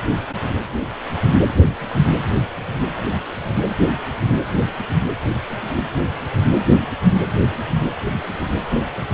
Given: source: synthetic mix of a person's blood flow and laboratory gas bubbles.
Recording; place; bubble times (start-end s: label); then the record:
Doppler ultrasound of blood flow; precordium
no bubbles
From the record:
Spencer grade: 0 (complete lack of bubble signals)